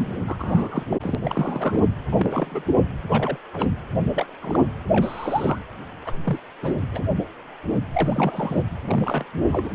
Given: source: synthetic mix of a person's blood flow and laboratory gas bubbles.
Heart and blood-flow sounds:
Doppler ultrasound of blood flow; precordium
0.27-0.36 s: bubbles
0.39-0.84 s: bubbles
0.89-0.96 s: bubbles
1.02-1.15 s: bubbles
1.22-1.84 s: bubbles
2.12-2.75 s: bubbles
3.11-3.37 s: bubbles
3.52-3.71 s: bubbles
4.12-4.33 s: bubbles
4.41-4.65 s: bubbles
4.92-5.59 s: bubbles
6.05-6.13 s: bubbles
6.24-6.38 s: bubbles
6.62-6.75 s: bubbles
6.93-7.03 s: bubbles
7.93-8.63 s: bubbles
8.88-9.24 s: bubbles
9.47-9.71 s: bubbles
From the record:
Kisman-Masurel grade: 232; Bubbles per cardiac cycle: several, 3 to 8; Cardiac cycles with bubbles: 50 to 99%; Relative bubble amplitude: moderate (0.250 to 0.450); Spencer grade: 3 (all of the cardiac periods contain showers or single bubble signals, but not dominating or overriding the cardiac motion signals); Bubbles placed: anywhere in the cardiac cycle

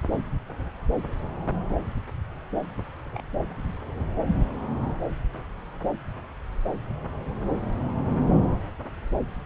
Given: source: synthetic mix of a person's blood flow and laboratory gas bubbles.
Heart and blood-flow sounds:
Doppler ultrasound of blood flow; subclavian vein
3.12-3.26 s: bubbles
From the record:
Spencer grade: 1 (occasional bubble signal discernible with the cardiac motion signal, with majority of cardiac periods free of bubbles); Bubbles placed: anywhere in the cardiac cycle

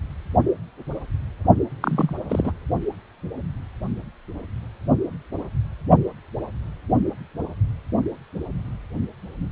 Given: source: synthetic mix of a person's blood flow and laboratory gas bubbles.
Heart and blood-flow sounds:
Doppler ultrasound of blood flow; precordium
1.81-2.15 s: bubbles
2.29-2.52 s: bubbles
From the record:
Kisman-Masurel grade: 212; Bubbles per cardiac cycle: several, 3 to 8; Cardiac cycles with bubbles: 1 to 10%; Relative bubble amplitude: moderate (0.250 to 0.450); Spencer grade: 1 (occasional bubble signal discernible with the cardiac motion signal, with majority of cardiac periods free of bubbles); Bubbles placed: only in the low amplitude regions of the cardiac cycle

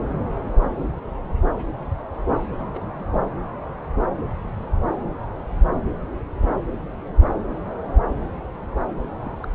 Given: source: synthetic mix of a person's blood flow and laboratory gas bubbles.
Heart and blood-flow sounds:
Doppler ultrasound of blood flow; subclavian vein
2.56-3.05 s: bubbles
9.22-9.36 s: bubbles
9.43-9.47 s: bubbles
From the record:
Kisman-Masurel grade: 211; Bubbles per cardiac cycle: several, 3 to 8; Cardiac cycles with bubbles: 1 to 10%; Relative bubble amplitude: barely perceptible (0.100 to 0.250); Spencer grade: 1 (occasional bubble signal discernible with the cardiac motion signal, with majority of cardiac periods free of bubbles); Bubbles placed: anywhere in the cardiac cycle

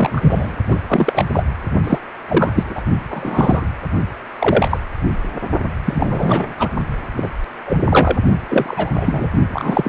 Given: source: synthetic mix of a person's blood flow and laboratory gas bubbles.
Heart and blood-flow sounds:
Doppler ultrasound of blood flow; precordium
0.00-0.55 s: bubbles
0.67-0.79 s: bubbles
0.89-1.25 s: bubbles
1.33-1.46 s: bubbles
1.84-1.98 s: bubbles
2.29-2.81 s: bubbles
3.10-3.66 s: bubbles
4.39-4.78 s: bubbles
5.85-6.54 s: bubbles
6.59-6.69 s: bubbles
7.17-7.29 s: bubbles
7.66-7.77 s: bubbles
7.89-8.17 s: bubbles
8.49-8.92 s: bubbles
8.96-9.30 s: bubbles
9.53-9.89 s: bubbles
From the record:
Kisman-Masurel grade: 243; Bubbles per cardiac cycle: several, 3 to 8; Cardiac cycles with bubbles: 100%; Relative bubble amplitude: loud (0.450 to 0.775); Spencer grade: 3 (all of the cardiac periods contain showers or single bubble signals, but not dominating or overriding the cardiac motion signals); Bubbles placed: only in the low amplitude regions of the cardiac cycle

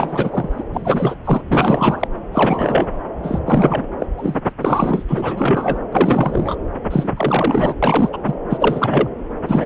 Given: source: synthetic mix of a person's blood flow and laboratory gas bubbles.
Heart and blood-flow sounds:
Doppler ultrasound of blood flow; subclavian vein
0.00-0.64 s: bubbles
0.72-1.15 s: bubbles
1.25-1.42 s: bubbles
1.48-2.07 s: bubbles
2.32-2.89 s: bubbles
3.23-3.40 s: bubbles
3.46-3.86 s: bubbles
3.99-4.07 s: bubbles
4.17-4.41 s: bubbles
4.47-4.53 s: bubbles
4.59-5.04 s: bubbles
5.08-5.79 s: bubbles
5.92-6.55 s: bubbles
6.91-7.09 s: bubbles
7.17-7.75 s: bubbles
7.83-8.09 s: bubbles
8.12-8.17 s: bubbles
8.26-8.34 s: bubbles
8.49-9.08 s: bubbles
9.46-9.65 s: bubbles
From the record:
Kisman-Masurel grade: 343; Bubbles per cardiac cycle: rolling drumbeat, 9 or more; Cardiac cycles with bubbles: 100%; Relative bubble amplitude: loud (0.450 to 0.775); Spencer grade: 3 (all of the cardiac periods contain showers or single bubble signals, but not dominating or overriding the cardiac motion signals); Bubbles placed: anywhere in the cardiac cycle

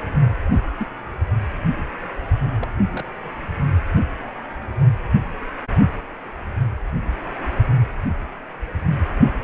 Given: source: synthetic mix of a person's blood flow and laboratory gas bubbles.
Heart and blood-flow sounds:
Doppler ultrasound of blood flow; precordium
0.80-0.87 s: bubbles
2.58-2.67 s: bubbles
2.94-3.05 s: bubbles
From the record:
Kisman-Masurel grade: 121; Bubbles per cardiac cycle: 1 to 2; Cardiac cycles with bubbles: 10 to 50%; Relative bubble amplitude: barely perceptible (0.100 to 0.250); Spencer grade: 2 (many but less than half of the cardiac periods contain bubble signals, singularly or in groups); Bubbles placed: anywhere in the cardiac cycle

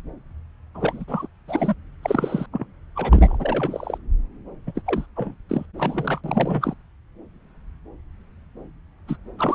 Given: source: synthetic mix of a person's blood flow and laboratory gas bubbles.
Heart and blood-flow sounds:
Doppler ultrasound of blood flow; subclavian vein
0.74-1.04 s: bubbles
1.07-1.27 s: bubbles
1.48-1.75 s: bubbles
2.03-2.46 s: bubbles
2.52-2.65 s: bubbles
2.95-3.98 s: bubbles
4.67-4.72 s: bubbles
4.75-4.82 s: bubbles
4.86-5.06 s: bubbles
5.16-5.34 s: bubbles
5.49-5.66 s: bubbles
5.77-6.21 s: bubbles
6.24-6.74 s: bubbles
9.07-9.16 s: bubbles
9.38-9.55 s: bubbles
From the record:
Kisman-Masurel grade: 332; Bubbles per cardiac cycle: rolling drumbeat, 9 or more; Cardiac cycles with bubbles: 50 to 99%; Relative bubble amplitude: moderate (0.250 to 0.450); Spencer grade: 3 (all of the cardiac periods contain showers or single bubble signals, but not dominating or overriding the cardiac motion signals); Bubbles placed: anywhere in the cardiac cycle

